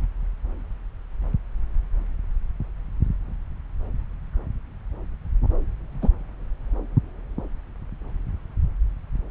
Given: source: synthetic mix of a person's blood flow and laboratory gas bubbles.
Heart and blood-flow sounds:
Doppler ultrasound of blood flow; subclavian vein
6.01-6.10 s: bubbles
From the record:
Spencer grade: 1 (occasional bubble signal discernible with the cardiac motion signal, with majority of cardiac periods free of bubbles); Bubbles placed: anywhere in the cardiac cycle

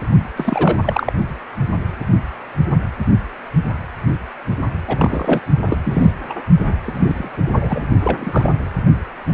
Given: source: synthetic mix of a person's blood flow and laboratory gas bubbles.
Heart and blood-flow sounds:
Doppler ultrasound of blood flow; precordium
0.35-1.12 s: bubbles
4.87-5.40 s: bubbles
5.63-5.77 s: bubbles
5.85-6.12 s: bubbles
6.29-6.34 s: bubbles
6.65-6.74 s: bubbles
6.83-7.31 s: bubbles
7.37-7.84 s: bubbles
8.02-8.66 s: bubbles
From the record:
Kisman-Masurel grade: 222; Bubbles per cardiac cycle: several, 3 to 8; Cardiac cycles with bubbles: 10 to 50%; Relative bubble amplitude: moderate (0.250 to 0.450); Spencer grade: 2 (many but less than half of the cardiac periods contain bubble signals, singularly or in groups); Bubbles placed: only in the low amplitude regions of the cardiac cycle

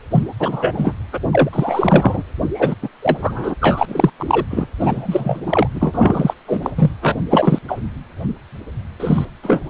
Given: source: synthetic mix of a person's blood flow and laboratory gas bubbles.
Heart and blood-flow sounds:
Doppler ultrasound of blood flow; precordium
0.11-0.23 s: bubbles
0.40-0.92 s: bubbles
1.11-1.18 s: bubbles
1.32-1.49 s: bubbles
1.52-2.23 s: bubbles
2.54-2.75 s: bubbles
2.82-2.89 s: bubbles
3.02-3.54 s: bubbles
3.61-4.10 s: bubbles
4.18-4.46 s: bubbles
4.50-4.66 s: bubbles
4.80-5.43 s: bubbles
5.46-5.67 s: bubbles
5.74-6.33 s: bubbles
6.47-6.70 s: bubbles
6.77-6.91 s: bubbles
7.01-7.16 s: bubbles
7.29-7.58 s: bubbles
7.68-7.79 s: bubbles
9.00-9.25 s: bubbles
9.43-9.62 s: bubbles
From the record:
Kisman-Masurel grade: 343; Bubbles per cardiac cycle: rolling drumbeat, 9 or more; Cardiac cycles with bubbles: 100%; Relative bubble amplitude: loud (0.450 to 0.775); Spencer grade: 3 (all of the cardiac periods contain showers or single bubble signals, but not dominating or overriding the cardiac motion signals); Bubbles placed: anywhere in the cardiac cycle

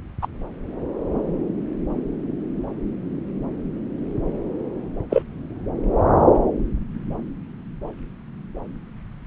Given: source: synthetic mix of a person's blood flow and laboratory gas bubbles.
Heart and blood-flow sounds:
Doppler ultrasound of blood flow; subclavian vein
0.22-0.27 s: bubbles
5.10-5.22 s: bubbles
From the record:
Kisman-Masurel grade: 123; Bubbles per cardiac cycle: 1 to 2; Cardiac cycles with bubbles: 10 to 50%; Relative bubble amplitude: loud (0.450 to 0.775); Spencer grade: 2 (many but less than half of the cardiac periods contain bubble signals, singularly or in groups); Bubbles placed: anywhere in the cardiac cycle

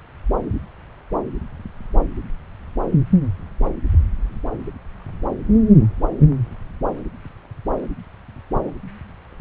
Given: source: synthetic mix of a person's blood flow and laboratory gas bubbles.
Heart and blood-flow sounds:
Doppler ultrasound of blood flow; subclavian vein
no bubbles
From the record:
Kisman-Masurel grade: 000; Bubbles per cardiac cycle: 0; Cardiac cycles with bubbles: 0%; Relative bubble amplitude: no bubbles discernible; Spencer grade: 0 (complete lack of bubble signals)

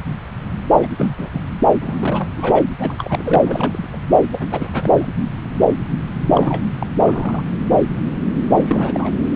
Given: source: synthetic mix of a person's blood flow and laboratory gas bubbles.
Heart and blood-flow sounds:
Doppler ultrasound of blood flow; subclavian vein
0.82-0.86 s: bubbles
0.97-1.15 s: bubbles
1.17-1.41 s: bubbles
1.80-2.31 s: bubbles
2.38-2.64 s: bubbles
2.79-3.87 s: bubbles
3.92-3.98 s: bubbles
4.32-4.49 s: bubbles
4.52-4.70 s: bubbles
4.73-5.07 s: bubbles
6.19-6.67 s: bubbles
6.79-6.87 s: bubbles
6.97-7.45 s: bubbles
8.53-9.12 s: bubbles
From the record:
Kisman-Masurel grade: 332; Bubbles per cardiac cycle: rolling drumbeat, 9 or more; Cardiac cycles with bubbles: 50 to 99%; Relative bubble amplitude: moderate (0.250 to 0.450); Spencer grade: 3 (all of the cardiac periods contain showers or single bubble signals, but not dominating or overriding the cardiac motion signals); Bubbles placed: anywhere in the cardiac cycle

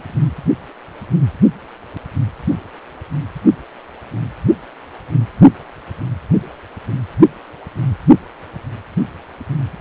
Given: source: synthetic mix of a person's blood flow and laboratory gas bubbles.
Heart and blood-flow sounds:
Doppler ultrasound of blood flow; precordium
0.00-0.03 s: bubbles
From the record:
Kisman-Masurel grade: 111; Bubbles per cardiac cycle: 1 to 2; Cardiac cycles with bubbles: 1 to 10%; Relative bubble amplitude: barely perceptible (0.100 to 0.250); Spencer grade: 1 (occasional bubble signal discernible with the cardiac motion signal, with majority of cardiac periods free of bubbles); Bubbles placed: only in the low amplitude regions of the cardiac cycle

